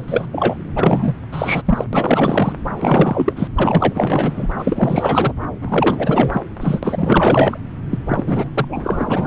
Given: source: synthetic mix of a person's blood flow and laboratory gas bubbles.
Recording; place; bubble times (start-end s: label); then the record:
Doppler ultrasound of blood flow; subclavian vein
0.00-0.27 s: bubbles
0.32-0.57 s: bubbles
0.76-1.16 s: bubbles
1.31-1.62 s: bubbles
1.65-1.84 s: bubbles
1.93-2.53 s: bubbles
2.75-3.49 s: bubbles
3.55-4.47 s: bubbles
4.58-5.34 s: bubbles
5.62-6.42 s: bubbles
6.60-6.80 s: bubbles
6.83-7.58 s: bubbles
7.90-7.98 s: bubbles
8.07-8.50 s: bubbles
8.54-9.27 s: bubbles
From the record:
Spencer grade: 4 (maximum detectable bubble signal sounding continuously throughout systole and diastole of every cardiac period, and overriding the amplitude of the normal cardiac signals); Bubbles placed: anywhere in the cardiac cycle